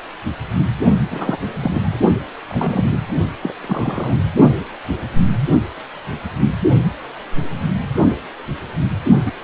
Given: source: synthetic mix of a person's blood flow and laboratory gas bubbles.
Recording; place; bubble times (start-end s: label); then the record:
Doppler ultrasound of blood flow; precordium
1.10-1.38 s: bubbles
1.60-2.02 s: bubbles
2.48-2.98 s: bubbles
3.42-3.52 s: bubbles
3.62-4.17 s: bubbles
9.26-9.32 s: bubbles
From the record:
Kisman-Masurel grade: 222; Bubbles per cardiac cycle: several, 3 to 8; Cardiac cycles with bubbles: 10 to 50%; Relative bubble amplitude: moderate (0.250 to 0.450); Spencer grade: 2 (many but less than half of the cardiac periods contain bubble signals, singularly or in groups); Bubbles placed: only in the low amplitude regions of the cardiac cycle